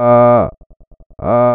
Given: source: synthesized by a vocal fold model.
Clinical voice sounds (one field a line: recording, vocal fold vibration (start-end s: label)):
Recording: sustained vowel that changes in the middle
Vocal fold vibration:
0.00-0.35 s: 120.7 Hz, open quotient 0.39
0.55-1.15 s: 10.0 Hz, open quotient 0.25
1.35-1.55 s: 120.7 Hz, open quotient 0.39